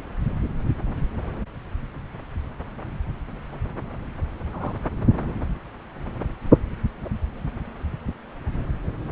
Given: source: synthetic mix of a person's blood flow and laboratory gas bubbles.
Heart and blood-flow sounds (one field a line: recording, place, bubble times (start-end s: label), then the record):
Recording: Doppler ultrasound of blood flow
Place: subclavian vein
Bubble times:
4.50-4.75 s: bubbles
From the record:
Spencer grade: 1 (occasional bubble signal discernible with the cardiac motion signal, with majority of cardiac periods free of bubbles)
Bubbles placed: anywhere in the cardiac cycle